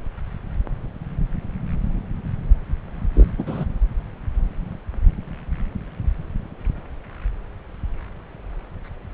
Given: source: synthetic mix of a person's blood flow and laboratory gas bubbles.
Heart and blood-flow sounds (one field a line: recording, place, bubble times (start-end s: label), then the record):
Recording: Doppler ultrasound of blood flow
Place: subclavian vein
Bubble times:
3.15-3.31 s: bubbles
3.38-3.44 s: bubbles
3.46-3.65 s: bubbles
From the record:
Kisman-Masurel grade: 212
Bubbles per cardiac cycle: several, 3 to 8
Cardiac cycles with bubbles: 1 to 10%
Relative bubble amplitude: moderate (0.250 to 0.450)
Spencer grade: 1 (occasional bubble signal discernible with the cardiac motion signal, with majority of cardiac periods free of bubbles)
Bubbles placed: anywhere in the cardiac cycle